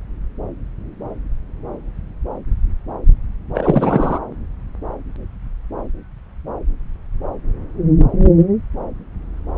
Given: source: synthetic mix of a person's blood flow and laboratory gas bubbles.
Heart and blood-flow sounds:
Doppler ultrasound of blood flow; subclavian vein
3.54-4.20 s: bubbles
From the record:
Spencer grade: 1 (occasional bubble signal discernible with the cardiac motion signal, with majority of cardiac periods free of bubbles); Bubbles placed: anywhere in the cardiac cycle

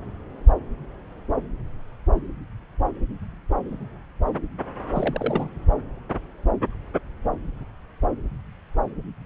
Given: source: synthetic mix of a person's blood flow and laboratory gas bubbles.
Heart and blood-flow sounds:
Doppler ultrasound of blood flow; subclavian vein
4.94-5.49 s: bubbles
From the record:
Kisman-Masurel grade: 212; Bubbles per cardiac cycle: several, 3 to 8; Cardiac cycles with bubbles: 1 to 10%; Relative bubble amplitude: moderate (0.250 to 0.450); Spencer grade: 1 (occasional bubble signal discernible with the cardiac motion signal, with majority of cardiac periods free of bubbles); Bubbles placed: anywhere in the cardiac cycle

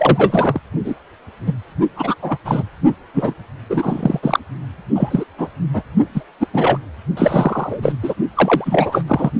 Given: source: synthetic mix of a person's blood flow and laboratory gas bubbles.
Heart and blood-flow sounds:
Doppler ultrasound of blood flow; precordium
0.00-0.61 s: bubbles
0.84-0.94 s: bubbles
1.46-1.53 s: bubbles
1.96-2.15 s: bubbles
2.21-2.37 s: bubbles
2.44-2.63 s: bubbles
3.13-3.34 s: bubbles
3.69-4.20 s: bubbles
4.22-4.39 s: bubbles
4.95-5.25 s: bubbles
5.38-5.50 s: bubbles
5.73-5.82 s: bubbles
6.14-6.21 s: bubbles
6.40-6.47 s: bubbles
6.53-6.77 s: bubbles
7.17-7.93 s: bubbles
8.03-8.14 s: bubbles
8.35-9.04 s: bubbles
9.07-9.30 s: bubbles
From the record:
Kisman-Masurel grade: 243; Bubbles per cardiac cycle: several, 3 to 8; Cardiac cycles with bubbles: 100%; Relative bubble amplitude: loud (0.450 to 0.775); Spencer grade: 3 (all of the cardiac periods contain showers or single bubble signals, but not dominating or overriding the cardiac motion signals); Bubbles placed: only in the low amplitude regions of the cardiac cycle

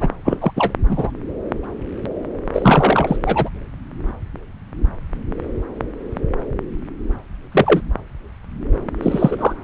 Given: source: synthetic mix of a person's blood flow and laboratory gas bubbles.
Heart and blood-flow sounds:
Doppler ultrasound of blood flow; subclavian vein
0.00-0.08 s: bubbles
0.25-0.52 s: bubbles
0.56-0.74 s: bubbles
0.89-1.10 s: bubbles
2.53-3.16 s: bubbles
3.23-3.49 s: bubbles
7.52-7.80 s: bubbles
9.02-9.54 s: bubbles
From the record:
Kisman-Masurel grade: 223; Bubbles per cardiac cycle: several, 3 to 8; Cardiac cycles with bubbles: 10 to 50%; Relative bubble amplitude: loud (0.450 to 0.775); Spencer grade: 2 (many but less than half of the cardiac periods contain bubble signals, singularly or in groups); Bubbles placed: anywhere in the cardiac cycle

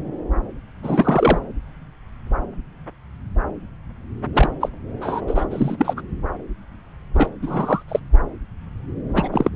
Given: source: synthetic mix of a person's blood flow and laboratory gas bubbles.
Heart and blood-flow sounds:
Doppler ultrasound of blood flow; subclavian vein
0.83-1.39 s: bubbles
4.34-4.50 s: bubbles
4.60-4.69 s: bubbles
5.01-5.21 s: bubbles
5.27-5.45 s: bubbles
5.50-5.93 s: bubbles
5.96-6.01 s: bubbles
7.13-7.30 s: bubbles
7.42-7.83 s: bubbles
7.88-7.99 s: bubbles
9.14-9.49 s: bubbles
From the record:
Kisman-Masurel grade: 233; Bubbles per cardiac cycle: several, 3 to 8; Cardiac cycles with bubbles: 50 to 99%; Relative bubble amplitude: loud (0.450 to 0.775); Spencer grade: 3 (all of the cardiac periods contain showers or single bubble signals, but not dominating or overriding the cardiac motion signals); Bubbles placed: anywhere in the cardiac cycle

